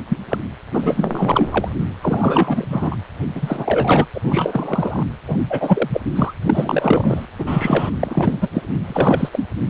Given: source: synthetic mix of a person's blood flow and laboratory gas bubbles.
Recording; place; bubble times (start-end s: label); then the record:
Doppler ultrasound of blood flow; precordium
0.09-0.17 s: bubbles
0.30-0.39 s: bubbles
0.73-1.68 s: bubbles
2.01-2.66 s: bubbles
2.70-2.98 s: bubbles
3.35-4.06 s: bubbles
4.14-4.21 s: bubbles
4.23-5.03 s: bubbles
5.27-5.37 s: bubbles
5.50-5.89 s: bubbles
5.92-6.01 s: bubbles
6.16-6.33 s: bubbles
6.42-7.26 s: bubbles
7.38-7.90 s: bubbles
8.00-8.36 s: bubbles
8.41-8.49 s: bubbles
8.55-8.65 s: bubbles
8.84-9.29 s: bubbles
9.33-9.46 s: bubbles
From the record:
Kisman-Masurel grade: 343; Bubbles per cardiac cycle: rolling drumbeat, 9 or more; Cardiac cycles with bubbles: 100%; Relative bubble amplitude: loud (0.450 to 0.775); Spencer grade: 3 (all of the cardiac periods contain showers or single bubble signals, but not dominating or overriding the cardiac motion signals); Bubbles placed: anywhere in the cardiac cycle